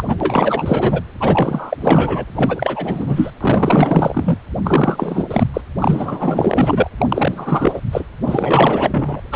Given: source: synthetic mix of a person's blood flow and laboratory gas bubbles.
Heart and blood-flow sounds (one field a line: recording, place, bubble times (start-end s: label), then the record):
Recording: Doppler ultrasound of blood flow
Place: precordium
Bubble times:
0.00-1.02 s: bubbles
1.20-1.77 s: bubbles
1.80-2.25 s: bubbles
2.34-3.30 s: bubbles
3.41-4.38 s: bubbles
4.64-5.25 s: bubbles
5.30-5.47 s: bubbles
5.54-5.61 s: bubbles
5.79-6.89 s: bubbles
6.98-7.81 s: bubbles
7.92-8.04 s: bubbles
8.26-9.21 s: bubbles
9.31-9.36 s: bubbles
From the record:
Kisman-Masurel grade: 444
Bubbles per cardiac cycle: continuous sound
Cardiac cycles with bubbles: 100%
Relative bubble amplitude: maximal (0.775 to 0.999)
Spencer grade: 4 (maximum detectable bubble signal sounding continuously throughout systole and diastole of every cardiac period, and overriding the amplitude of the normal cardiac signals)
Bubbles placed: anywhere in the cardiac cycle